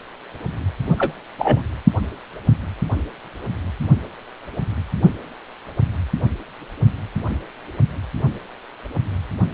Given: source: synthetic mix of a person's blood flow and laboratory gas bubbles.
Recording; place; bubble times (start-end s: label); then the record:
Doppler ultrasound of blood flow; precordium
0.98-1.13 s: bubbles
1.38-1.61 s: bubbles
From the record:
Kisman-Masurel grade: 113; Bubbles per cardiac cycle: 1 to 2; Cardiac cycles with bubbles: 1 to 10%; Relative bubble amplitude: loud (0.450 to 0.775); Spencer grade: 1 (occasional bubble signal discernible with the cardiac motion signal, with majority of cardiac periods free of bubbles); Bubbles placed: only in the low amplitude regions of the cardiac cycle